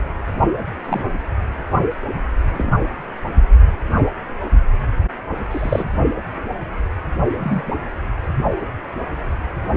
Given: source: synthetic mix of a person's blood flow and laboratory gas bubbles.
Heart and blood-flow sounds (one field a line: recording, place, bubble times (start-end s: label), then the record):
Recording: Doppler ultrasound of blood flow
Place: precordium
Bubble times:
0.88-1.03 s: bubbles
2.52-2.72 s: bubbles
5.50-5.88 s: bubbles
7.39-7.62 s: bubbles
From the record:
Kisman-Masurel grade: 122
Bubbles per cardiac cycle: 1 to 2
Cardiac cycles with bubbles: 10 to 50%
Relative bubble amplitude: moderate (0.250 to 0.450)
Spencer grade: 2 (many but less than half of the cardiac periods contain bubble signals, singularly or in groups)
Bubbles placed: only in the low amplitude regions of the cardiac cycle